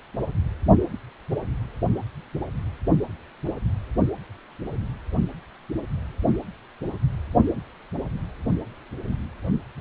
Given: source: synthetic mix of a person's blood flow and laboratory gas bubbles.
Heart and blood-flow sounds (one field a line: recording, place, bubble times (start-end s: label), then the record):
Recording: Doppler ultrasound of blood flow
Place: precordium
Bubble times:
no bubbles
From the record:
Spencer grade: 0 (complete lack of bubble signals)